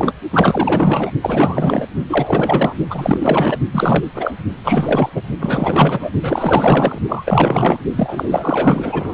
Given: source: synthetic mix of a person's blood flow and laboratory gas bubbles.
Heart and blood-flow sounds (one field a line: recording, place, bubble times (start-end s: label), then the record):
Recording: Doppler ultrasound of blood flow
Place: precordium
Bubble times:
0.00-0.13 s: bubbles
0.33-1.10 s: bubbles
1.22-1.87 s: bubbles
2.09-2.74 s: bubbles
2.90-3.57 s: bubbles
3.72-4.10 s: bubbles
4.14-4.32 s: bubbles
4.64-5.09 s: bubbles
5.14-5.23 s: bubbles
5.40-6.11 s: bubbles
6.22-6.98 s: bubbles
7.08-7.77 s: bubbles
7.96-9.13 s: bubbles
From the record:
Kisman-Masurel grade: 444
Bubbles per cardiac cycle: continuous sound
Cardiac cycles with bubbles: 100%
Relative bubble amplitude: maximal (0.775 to 0.999)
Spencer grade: 4 (maximum detectable bubble signal sounding continuously throughout systole and diastole of every cardiac period, and overriding the amplitude of the normal cardiac signals)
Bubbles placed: only in the low amplitude regions of the cardiac cycle